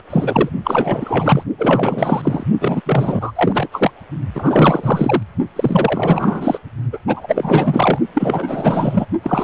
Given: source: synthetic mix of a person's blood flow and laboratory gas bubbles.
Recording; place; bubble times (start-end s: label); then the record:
Doppler ultrasound of blood flow; precordium
0.10-0.49 s: bubbles
0.64-1.44 s: bubbles
1.57-2.43 s: bubbles
2.61-2.81 s: bubbles
2.86-3.32 s: bubbles
3.35-3.68 s: bubbles
3.71-3.91 s: bubbles
4.34-5.22 s: bubbles
5.55-6.58 s: bubbles
6.92-6.98 s: bubbles
7.07-7.98 s: bubbles
8.14-9.05 s: bubbles
9.22-9.44 s: bubbles
From the record:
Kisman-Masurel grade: 444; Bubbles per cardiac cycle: continuous sound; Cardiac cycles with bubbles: 100%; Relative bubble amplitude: maximal (0.775 to 0.999); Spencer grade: 4 (maximum detectable bubble signal sounding continuously throughout systole and diastole of every cardiac period, and overriding the amplitude of the normal cardiac signals); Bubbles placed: only in the low amplitude regions of the cardiac cycle